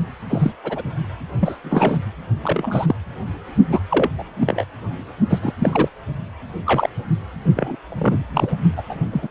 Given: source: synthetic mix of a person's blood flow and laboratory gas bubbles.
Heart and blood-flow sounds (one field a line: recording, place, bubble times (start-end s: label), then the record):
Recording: Doppler ultrasound of blood flow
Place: precordium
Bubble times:
0.29-0.52 s: bubbles
0.64-0.82 s: bubbles
1.39-1.56 s: bubbles
1.64-1.99 s: bubbles
2.43-2.96 s: bubbles
3.71-3.79 s: bubbles
3.90-4.09 s: bubbles
4.18-4.24 s: bubbles
4.36-4.64 s: bubbles
5.29-5.38 s: bubbles
5.42-5.54 s: bubbles
5.58-5.88 s: bubbles
6.66-6.89 s: bubbles
7.56-7.76 s: bubbles
7.88-8.26 s: bubbles
8.34-8.51 s: bubbles
8.77-8.82 s: bubbles
8.88-8.95 s: bubbles
9.12-9.28 s: bubbles
From the record:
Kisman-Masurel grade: 242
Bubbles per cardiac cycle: several, 3 to 8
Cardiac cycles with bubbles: 100%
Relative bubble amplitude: moderate (0.250 to 0.450)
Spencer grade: 3 (all of the cardiac periods contain showers or single bubble signals, but not dominating or overriding the cardiac motion signals)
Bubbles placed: only in the low amplitude regions of the cardiac cycle